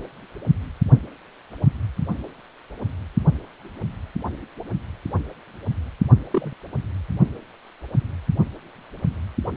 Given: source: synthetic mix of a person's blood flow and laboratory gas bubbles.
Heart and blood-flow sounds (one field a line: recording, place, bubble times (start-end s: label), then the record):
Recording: Doppler ultrasound of blood flow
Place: precordium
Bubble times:
6.30-6.53 s: bubbles
From the record:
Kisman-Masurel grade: 112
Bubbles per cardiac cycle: 1 to 2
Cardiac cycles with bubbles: 1 to 10%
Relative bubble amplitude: moderate (0.250 to 0.450)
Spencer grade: 1 (occasional bubble signal discernible with the cardiac motion signal, with majority of cardiac periods free of bubbles)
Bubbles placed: only in the low amplitude regions of the cardiac cycle